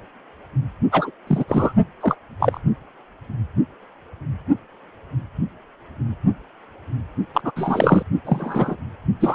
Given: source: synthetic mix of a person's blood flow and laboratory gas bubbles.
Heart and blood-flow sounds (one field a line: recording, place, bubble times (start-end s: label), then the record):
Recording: Doppler ultrasound of blood flow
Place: precordium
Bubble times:
0.92-1.10 s: bubbles
1.26-1.45 s: bubbles
1.48-1.73 s: bubbles
2.00-2.16 s: bubbles
2.40-2.60 s: bubbles
7.34-7.41 s: bubbles
7.44-7.52 s: bubbles
7.56-8.03 s: bubbles
8.25-8.77 s: bubbles
9.20-9.35 s: bubbles
From the record:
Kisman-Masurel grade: 233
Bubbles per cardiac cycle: several, 3 to 8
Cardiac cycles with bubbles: 50 to 99%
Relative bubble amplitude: loud (0.450 to 0.775)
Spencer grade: 3 (all of the cardiac periods contain showers or single bubble signals, but not dominating or overriding the cardiac motion signals)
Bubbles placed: only in the low amplitude regions of the cardiac cycle